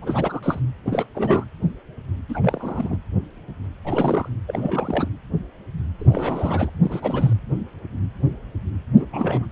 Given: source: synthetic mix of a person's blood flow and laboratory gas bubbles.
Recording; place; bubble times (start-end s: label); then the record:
Doppler ultrasound of blood flow; precordium
0.00-0.59 s: bubbles
0.85-1.06 s: bubbles
1.14-1.44 s: bubbles
2.29-2.97 s: bubbles
3.85-4.28 s: bubbles
4.47-5.08 s: bubbles
6.00-6.70 s: bubbles
6.81-7.33 s: bubbles
8.96-9.07 s: bubbles
9.12-9.46 s: bubbles
From the record:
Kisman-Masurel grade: 332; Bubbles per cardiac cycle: rolling drumbeat, 9 or more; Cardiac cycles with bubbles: 50 to 99%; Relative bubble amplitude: moderate (0.250 to 0.450); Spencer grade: 3 (all of the cardiac periods contain showers or single bubble signals, but not dominating or overriding the cardiac motion signals); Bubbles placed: anywhere in the cardiac cycle